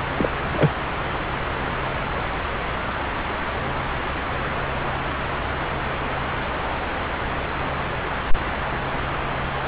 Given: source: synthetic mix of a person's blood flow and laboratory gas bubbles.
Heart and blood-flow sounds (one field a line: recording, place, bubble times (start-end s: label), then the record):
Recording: Doppler ultrasound of blood flow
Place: subclavian vein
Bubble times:
0.18-0.29 s: bubbles
0.43-0.71 s: bubbles
From the record:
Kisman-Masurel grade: 212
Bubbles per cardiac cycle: several, 3 to 8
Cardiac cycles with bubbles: 1 to 10%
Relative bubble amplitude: moderate (0.250 to 0.450)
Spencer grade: 1 (occasional bubble signal discernible with the cardiac motion signal, with majority of cardiac periods free of bubbles)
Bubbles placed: anywhere in the cardiac cycle